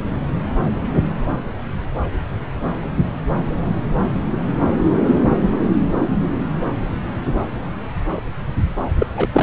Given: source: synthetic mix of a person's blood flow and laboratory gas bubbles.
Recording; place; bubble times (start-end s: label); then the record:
Doppler ultrasound of blood flow; subclavian vein
8.99-9.06 s: bubbles
9.16-9.29 s: bubbles
9.32-9.43 s: bubbles
From the record:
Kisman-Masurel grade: 212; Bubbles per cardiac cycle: several, 3 to 8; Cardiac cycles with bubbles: 1 to 10%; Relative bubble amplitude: moderate (0.250 to 0.450); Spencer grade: 1 (occasional bubble signal discernible with the cardiac motion signal, with majority of cardiac periods free of bubbles); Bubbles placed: anywhere in the cardiac cycle